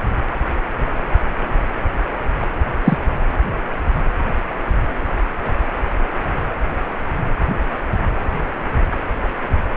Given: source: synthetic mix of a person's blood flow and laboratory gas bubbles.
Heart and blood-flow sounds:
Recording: Doppler ultrasound of blood flow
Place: precordium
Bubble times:
2.85-2.97 s: bubbles
From the record:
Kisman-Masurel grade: 113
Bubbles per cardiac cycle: 1 to 2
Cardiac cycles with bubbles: 1 to 10%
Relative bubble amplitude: loud (0.450 to 0.775)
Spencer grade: 1 (occasional bubble signal discernible with the cardiac motion signal, with majority of cardiac periods free of bubbles)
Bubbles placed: anywhere in the cardiac cycle

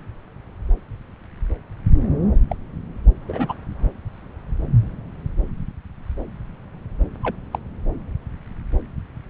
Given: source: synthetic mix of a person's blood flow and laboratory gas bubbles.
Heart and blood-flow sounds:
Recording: Doppler ultrasound of blood flow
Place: subclavian vein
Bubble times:
2.49-2.55 s: bubbles
3.27-3.53 s: bubbles
7.23-7.36 s: bubbles
7.51-7.59 s: bubbles
From the record:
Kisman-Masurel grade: 122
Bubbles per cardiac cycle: 1 to 2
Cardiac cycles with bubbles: 10 to 50%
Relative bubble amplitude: moderate (0.250 to 0.450)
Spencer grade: 2 (many but less than half of the cardiac periods contain bubble signals, singularly or in groups)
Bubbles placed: anywhere in the cardiac cycle

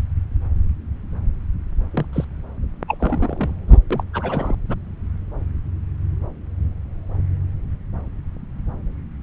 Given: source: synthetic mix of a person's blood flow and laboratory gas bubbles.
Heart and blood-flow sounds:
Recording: Doppler ultrasound of blood flow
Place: subclavian vein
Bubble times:
1.94-2.06 s: bubbles
2.13-2.25 s: bubbles
2.88-3.54 s: bubbles
3.68-3.80 s: bubbles
3.90-4.03 s: bubbles
4.13-4.55 s: bubbles
4.68-4.77 s: bubbles
From the record:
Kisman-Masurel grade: 222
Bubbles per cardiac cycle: several, 3 to 8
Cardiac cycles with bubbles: 10 to 50%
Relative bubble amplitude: moderate (0.250 to 0.450)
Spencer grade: 2 (many but less than half of the cardiac periods contain bubble signals, singularly or in groups)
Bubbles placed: anywhere in the cardiac cycle

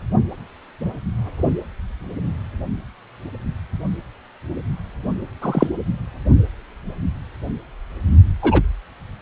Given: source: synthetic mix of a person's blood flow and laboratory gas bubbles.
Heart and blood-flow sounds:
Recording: Doppler ultrasound of blood flow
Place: precordium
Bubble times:
5.42-5.67 s: bubbles
8.42-8.62 s: bubbles
From the record:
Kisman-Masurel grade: 123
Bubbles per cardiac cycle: 1 to 2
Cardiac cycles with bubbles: 10 to 50%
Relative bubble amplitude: loud (0.450 to 0.775)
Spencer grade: 2 (many but less than half of the cardiac periods contain bubble signals, singularly or in groups)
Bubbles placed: only in the low amplitude regions of the cardiac cycle

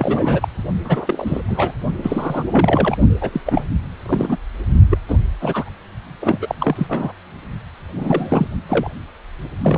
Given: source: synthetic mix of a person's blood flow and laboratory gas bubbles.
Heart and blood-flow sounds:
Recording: Doppler ultrasound of blood flow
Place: precordium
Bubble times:
0.00-0.48 s: bubbles
0.84-1.41 s: bubbles
1.46-1.74 s: bubbles
2.02-2.43 s: bubbles
2.51-2.96 s: bubbles
3.21-3.29 s: bubbles
3.32-3.41 s: bubbles
3.46-3.67 s: bubbles
4.05-4.38 s: bubbles
4.89-4.98 s: bubbles
5.08-5.18 s: bubbles
5.40-5.70 s: bubbles
6.21-6.38 s: bubbles
6.41-6.55 s: bubbles
6.60-7.12 s: bubbles
7.95-8.47 s: bubbles
8.69-8.90 s: bubbles
9.62-9.78 s: bubbles
From the record:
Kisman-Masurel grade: 342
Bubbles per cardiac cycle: rolling drumbeat, 9 or more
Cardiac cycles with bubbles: 100%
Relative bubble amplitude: moderate (0.250 to 0.450)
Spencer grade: 3 (all of the cardiac periods contain showers or single bubble signals, but not dominating or overriding the cardiac motion signals)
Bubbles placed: only in the low amplitude regions of the cardiac cycle

